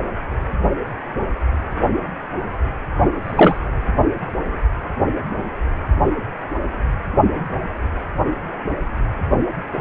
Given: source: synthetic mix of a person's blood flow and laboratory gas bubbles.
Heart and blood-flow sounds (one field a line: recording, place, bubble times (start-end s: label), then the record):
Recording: Doppler ultrasound of blood flow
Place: precordium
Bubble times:
3.24-3.58 s: bubbles
From the record:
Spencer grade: 1 (occasional bubble signal discernible with the cardiac motion signal, with majority of cardiac periods free of bubbles)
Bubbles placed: only in the low amplitude regions of the cardiac cycle